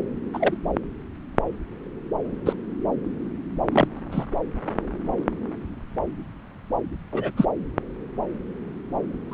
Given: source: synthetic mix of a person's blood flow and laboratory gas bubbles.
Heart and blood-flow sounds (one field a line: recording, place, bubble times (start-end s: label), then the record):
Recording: Doppler ultrasound of blood flow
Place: subclavian vein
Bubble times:
0.34-0.56 s: bubbles
2.45-2.53 s: bubbles
3.71-3.88 s: bubbles
4.12-4.25 s: bubbles
7.12-7.31 s: bubbles
7.37-7.45 s: bubbles
9.29-9.34 s: bubbles
From the record:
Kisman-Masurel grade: 122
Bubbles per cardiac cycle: 1 to 2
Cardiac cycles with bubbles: 10 to 50%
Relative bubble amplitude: moderate (0.250 to 0.450)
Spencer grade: 2 (many but less than half of the cardiac periods contain bubble signals, singularly or in groups)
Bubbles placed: anywhere in the cardiac cycle